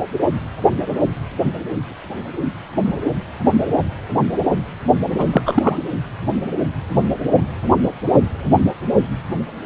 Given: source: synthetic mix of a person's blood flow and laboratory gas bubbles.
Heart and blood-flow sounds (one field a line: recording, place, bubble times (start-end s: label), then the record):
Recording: Doppler ultrasound of blood flow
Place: precordium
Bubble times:
5.17-5.25 s: bubbles
5.32-5.42 s: bubbles
5.46-5.77 s: bubbles
From the record:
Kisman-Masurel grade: 223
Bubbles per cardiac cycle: several, 3 to 8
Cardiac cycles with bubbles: 10 to 50%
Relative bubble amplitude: loud (0.450 to 0.775)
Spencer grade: 2 (many but less than half of the cardiac periods contain bubble signals, singularly or in groups)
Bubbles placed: anywhere in the cardiac cycle